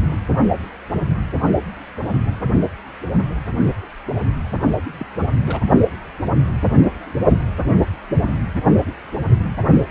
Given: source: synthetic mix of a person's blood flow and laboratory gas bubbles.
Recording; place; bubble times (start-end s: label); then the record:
Doppler ultrasound of blood flow; precordium
4.99-5.06 s: bubbles
5.46-5.60 s: bubbles
From the record:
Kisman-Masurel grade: 211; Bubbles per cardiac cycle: several, 3 to 8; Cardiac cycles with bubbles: 1 to 10%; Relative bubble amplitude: barely perceptible (0.100 to 0.250); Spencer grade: 1 (occasional bubble signal discernible with the cardiac motion signal, with majority of cardiac periods free of bubbles); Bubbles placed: only in the low amplitude regions of the cardiac cycle